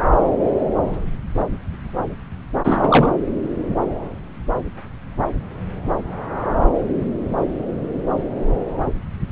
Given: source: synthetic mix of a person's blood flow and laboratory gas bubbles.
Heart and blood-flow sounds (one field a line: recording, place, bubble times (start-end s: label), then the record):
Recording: Doppler ultrasound of blood flow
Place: subclavian vein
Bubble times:
2.64-3.11 s: bubbles
From the record:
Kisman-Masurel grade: 213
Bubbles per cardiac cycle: several, 3 to 8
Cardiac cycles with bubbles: 1 to 10%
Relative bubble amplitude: loud (0.450 to 0.775)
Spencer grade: 1 (occasional bubble signal discernible with the cardiac motion signal, with majority of cardiac periods free of bubbles)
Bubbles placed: anywhere in the cardiac cycle